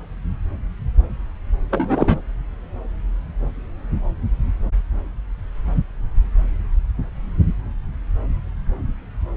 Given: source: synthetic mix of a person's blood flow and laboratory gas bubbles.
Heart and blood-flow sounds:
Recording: Doppler ultrasound of blood flow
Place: subclavian vein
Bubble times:
1.70-2.21 s: bubbles
From the record:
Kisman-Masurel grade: 113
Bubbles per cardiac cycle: 1 to 2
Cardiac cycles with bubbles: 1 to 10%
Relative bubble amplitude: loud (0.450 to 0.775)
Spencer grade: 1 (occasional bubble signal discernible with the cardiac motion signal, with majority of cardiac periods free of bubbles)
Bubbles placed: anywhere in the cardiac cycle

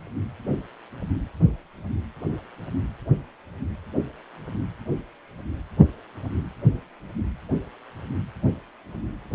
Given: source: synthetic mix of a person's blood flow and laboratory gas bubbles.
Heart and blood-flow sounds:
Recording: Doppler ultrasound of blood flow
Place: precordium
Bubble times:
no bubbles
From the record:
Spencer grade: 0 (complete lack of bubble signals)

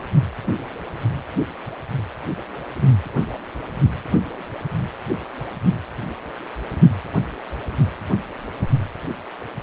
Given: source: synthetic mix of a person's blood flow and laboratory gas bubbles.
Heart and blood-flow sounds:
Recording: Doppler ultrasound of blood flow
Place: precordium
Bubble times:
no bubbles
From the record:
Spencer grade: 0 (complete lack of bubble signals)

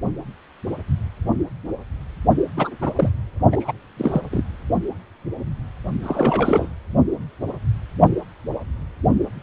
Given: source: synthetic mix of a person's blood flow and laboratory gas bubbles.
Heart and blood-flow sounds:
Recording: Doppler ultrasound of blood flow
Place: precordium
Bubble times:
2.56-2.71 s: bubbles
2.81-2.91 s: bubbles
2.97-3.11 s: bubbles
3.52-3.72 s: bubbles
3.97-4.21 s: bubbles
4.31-4.44 s: bubbles
6.03-6.69 s: bubbles
From the record:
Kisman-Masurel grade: 222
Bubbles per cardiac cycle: several, 3 to 8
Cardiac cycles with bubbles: 10 to 50%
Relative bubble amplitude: moderate (0.250 to 0.450)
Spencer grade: 2 (many but less than half of the cardiac periods contain bubble signals, singularly or in groups)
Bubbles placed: only in the low amplitude regions of the cardiac cycle

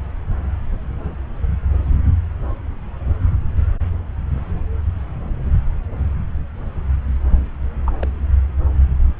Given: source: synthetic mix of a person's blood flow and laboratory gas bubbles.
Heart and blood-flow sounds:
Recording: Doppler ultrasound of blood flow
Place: subclavian vein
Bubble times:
7.86-7.93 s: bubbles
8.00-8.05 s: bubbles
From the record:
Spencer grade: 2 (many but less than half of the cardiac periods contain bubble signals, singularly or in groups)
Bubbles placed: anywhere in the cardiac cycle

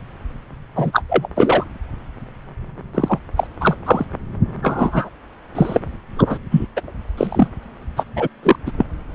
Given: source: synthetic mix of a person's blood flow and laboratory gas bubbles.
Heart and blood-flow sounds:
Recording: Doppler ultrasound of blood flow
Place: subclavian vein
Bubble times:
0.76-1.02 s: bubbles
1.09-1.27 s: bubbles
1.35-1.64 s: bubbles
2.94-3.19 s: bubbles
3.37-3.47 s: bubbles
3.60-3.76 s: bubbles
3.85-4.05 s: bubbles
4.62-5.09 s: bubbles
5.55-5.80 s: bubbles
6.16-6.38 s: bubbles
6.50-6.67 s: bubbles
6.76-6.81 s: bubbles
7.17-7.47 s: bubbles
7.96-8.04 s: bubbles
8.16-8.28 s: bubbles
8.43-8.56 s: bubbles
8.66-8.71 s: bubbles
8.78-8.86 s: bubbles
From the record:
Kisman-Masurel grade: 233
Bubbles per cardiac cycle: several, 3 to 8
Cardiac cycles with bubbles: 50 to 99%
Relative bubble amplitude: loud (0.450 to 0.775)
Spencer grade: 3 (all of the cardiac periods contain showers or single bubble signals, but not dominating or overriding the cardiac motion signals)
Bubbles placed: anywhere in the cardiac cycle

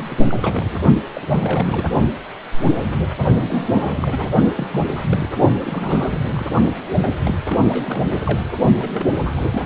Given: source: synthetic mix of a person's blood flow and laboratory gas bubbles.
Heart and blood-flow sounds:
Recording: Doppler ultrasound of blood flow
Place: precordium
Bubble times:
0.00-0.23 s: bubbles
0.30-0.83 s: bubbles
1.14-1.85 s: bubbles
3.48-4.30 s: bubbles
4.55-4.67 s: bubbles
4.71-4.82 s: bubbles
4.87-5.28 s: bubbles
5.64-6.19 s: bubbles
6.23-6.46 s: bubbles
7.19-7.34 s: bubbles
7.46-7.59 s: bubbles
7.69-8.52 s: bubbles
8.79-8.89 s: bubbles
8.93-9.06 s: bubbles
9.11-9.31 s: bubbles
9.36-9.41 s: bubbles
9.50-9.65 s: bubbles
From the record:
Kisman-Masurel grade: 332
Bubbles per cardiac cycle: rolling drumbeat, 9 or more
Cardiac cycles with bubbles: 50 to 99%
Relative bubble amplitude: moderate (0.250 to 0.450)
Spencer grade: 3 (all of the cardiac periods contain showers or single bubble signals, but not dominating or overriding the cardiac motion signals)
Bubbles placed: only in the low amplitude regions of the cardiac cycle

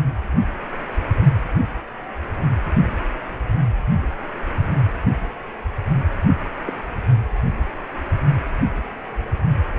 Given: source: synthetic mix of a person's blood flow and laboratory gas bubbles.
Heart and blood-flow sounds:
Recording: Doppler ultrasound of blood flow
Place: precordium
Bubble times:
6.66-6.74 s: bubbles
From the record:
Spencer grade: 1 (occasional bubble signal discernible with the cardiac motion signal, with majority of cardiac periods free of bubbles)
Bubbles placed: anywhere in the cardiac cycle

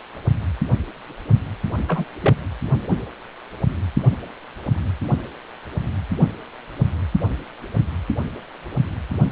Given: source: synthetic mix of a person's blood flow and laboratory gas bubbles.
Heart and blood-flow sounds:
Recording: Doppler ultrasound of blood flow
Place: precordium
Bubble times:
1.88-2.05 s: bubbles
2.23-2.35 s: bubbles
From the record:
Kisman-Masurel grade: 112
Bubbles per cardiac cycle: 1 to 2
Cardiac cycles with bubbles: 1 to 10%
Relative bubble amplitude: moderate (0.250 to 0.450)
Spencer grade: 1 (occasional bubble signal discernible with the cardiac motion signal, with majority of cardiac periods free of bubbles)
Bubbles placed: only in the low amplitude regions of the cardiac cycle

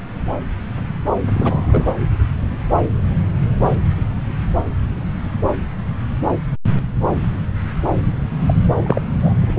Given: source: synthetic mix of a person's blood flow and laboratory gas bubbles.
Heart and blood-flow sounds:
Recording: Doppler ultrasound of blood flow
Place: subclavian vein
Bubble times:
1.34-1.94 s: bubbles
8.46-8.54 s: bubbles
8.84-9.04 s: bubbles
9.21-9.34 s: bubbles
9.41-9.54 s: bubbles
From the record:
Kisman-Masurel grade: 222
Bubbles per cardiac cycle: several, 3 to 8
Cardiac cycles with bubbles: 10 to 50%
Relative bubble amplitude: moderate (0.250 to 0.450)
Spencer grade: 2 (many but less than half of the cardiac periods contain bubble signals, singularly or in groups)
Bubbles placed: anywhere in the cardiac cycle

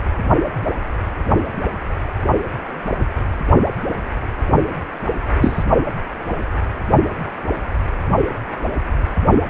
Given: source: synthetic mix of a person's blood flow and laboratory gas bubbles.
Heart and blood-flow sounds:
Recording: Doppler ultrasound of blood flow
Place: precordium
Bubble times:
5.41-5.64 s: bubbles
From the record:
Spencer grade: 2 (many but less than half of the cardiac periods contain bubble signals, singularly or in groups)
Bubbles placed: only in the low amplitude regions of the cardiac cycle

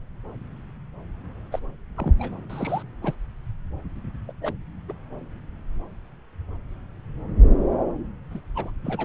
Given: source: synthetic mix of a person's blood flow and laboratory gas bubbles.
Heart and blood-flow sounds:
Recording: Doppler ultrasound of blood flow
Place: subclavian vein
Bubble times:
1.52-1.59 s: bubbles
1.97-2.13 s: bubbles
2.18-2.32 s: bubbles
2.50-2.83 s: bubbles
3.03-3.14 s: bubbles
4.28-4.32 s: bubbles
4.42-4.54 s: bubbles
4.89-4.92 s: bubbles
8.30-8.40 s: bubbles
8.55-8.70 s: bubbles
8.84-9.05 s: bubbles
From the record:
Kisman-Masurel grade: 221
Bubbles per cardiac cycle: several, 3 to 8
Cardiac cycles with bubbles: 10 to 50%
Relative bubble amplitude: barely perceptible (0.100 to 0.250)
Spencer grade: 2 (many but less than half of the cardiac periods contain bubble signals, singularly or in groups)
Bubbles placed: anywhere in the cardiac cycle

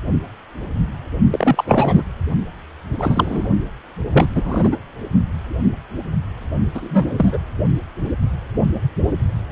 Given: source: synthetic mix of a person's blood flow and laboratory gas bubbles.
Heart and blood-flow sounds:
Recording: Doppler ultrasound of blood flow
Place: precordium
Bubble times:
1.30-2.02 s: bubbles
2.98-3.49 s: bubbles
4.13-4.26 s: bubbles
4.35-4.76 s: bubbles
6.75-7.38 s: bubbles
From the record:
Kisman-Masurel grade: 233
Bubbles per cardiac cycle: several, 3 to 8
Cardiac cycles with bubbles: 50 to 99%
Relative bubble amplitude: loud (0.450 to 0.775)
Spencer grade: 3 (all of the cardiac periods contain showers or single bubble signals, but not dominating or overriding the cardiac motion signals)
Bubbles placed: only in the low amplitude regions of the cardiac cycle

